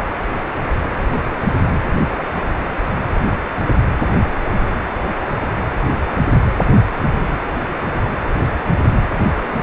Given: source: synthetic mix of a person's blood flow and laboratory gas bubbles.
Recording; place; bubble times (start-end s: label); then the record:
Doppler ultrasound of blood flow; precordium
no bubbles
From the record:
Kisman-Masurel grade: 000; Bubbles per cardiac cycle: 0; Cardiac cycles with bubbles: 0%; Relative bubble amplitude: no bubbles discernible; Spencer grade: 0 (complete lack of bubble signals)